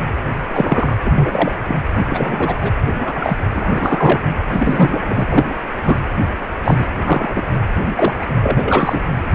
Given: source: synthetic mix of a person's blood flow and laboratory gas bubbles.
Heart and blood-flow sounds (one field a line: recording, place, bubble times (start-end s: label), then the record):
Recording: Doppler ultrasound of blood flow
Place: precordium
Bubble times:
0.47-0.97 s: bubbles
1.04-1.59 s: bubbles
1.68-1.82 s: bubbles
1.94-2.04 s: bubbles
2.07-2.57 s: bubbles
2.61-2.71 s: bubbles
2.99-3.38 s: bubbles
3.53-4.20 s: bubbles
4.51-5.25 s: bubbles
5.27-5.45 s: bubbles
5.83-5.99 s: bubbles
6.64-6.87 s: bubbles
7.05-7.45 s: bubbles
7.95-8.13 s: bubbles
8.21-8.26 s: bubbles
8.42-9.01 s: bubbles
From the record:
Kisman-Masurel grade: 243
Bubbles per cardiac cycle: several, 3 to 8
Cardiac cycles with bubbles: 100%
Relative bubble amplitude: loud (0.450 to 0.775)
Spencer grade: 3 (all of the cardiac periods contain showers or single bubble signals, but not dominating or overriding the cardiac motion signals)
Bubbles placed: anywhere in the cardiac cycle